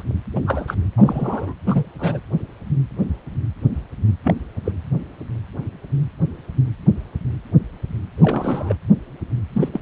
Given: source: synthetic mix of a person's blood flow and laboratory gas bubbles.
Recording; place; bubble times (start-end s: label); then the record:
Doppler ultrasound of blood flow; precordium
0.00-0.02 s: bubbles
0.36-0.40 s: bubbles
0.47-0.75 s: bubbles
0.97-1.54 s: bubbles
1.66-1.83 s: bubbles
1.99-2.20 s: bubbles
4.24-4.34 s: bubbles
4.65-4.71 s: bubbles
8.17-8.75 s: bubbles
9.52-9.69 s: bubbles
9.73-9.80 s: bubbles
From the record:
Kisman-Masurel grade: 222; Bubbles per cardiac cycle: several, 3 to 8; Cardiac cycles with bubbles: 10 to 50%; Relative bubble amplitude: moderate (0.250 to 0.450); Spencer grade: 2 (many but less than half of the cardiac periods contain bubble signals, singularly or in groups); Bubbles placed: anywhere in the cardiac cycle